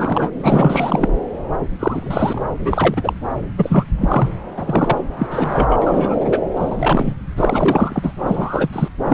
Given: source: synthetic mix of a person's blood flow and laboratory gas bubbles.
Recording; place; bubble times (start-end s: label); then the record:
Doppler ultrasound of blood flow; subclavian vein
0.00-0.30 s: bubbles
0.42-1.08 s: bubbles
1.79-2.42 s: bubbles
2.59-3.13 s: bubbles
3.56-3.85 s: bubbles
4.00-4.29 s: bubbles
4.56-4.96 s: bubbles
5.18-5.27 s: bubbles
5.30-6.17 s: bubbles
6.20-6.39 s: bubbles
6.56-7.16 s: bubbles
7.36-8.12 s: bubbles
8.18-8.69 s: bubbles
8.72-8.88 s: bubbles
9.04-9.14 s: bubbles
From the record:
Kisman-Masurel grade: 343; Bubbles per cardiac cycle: rolling drumbeat, 9 or more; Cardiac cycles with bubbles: 100%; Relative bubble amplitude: loud (0.450 to 0.775); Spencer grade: 3 (all of the cardiac periods contain showers or single bubble signals, but not dominating or overriding the cardiac motion signals); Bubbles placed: anywhere in the cardiac cycle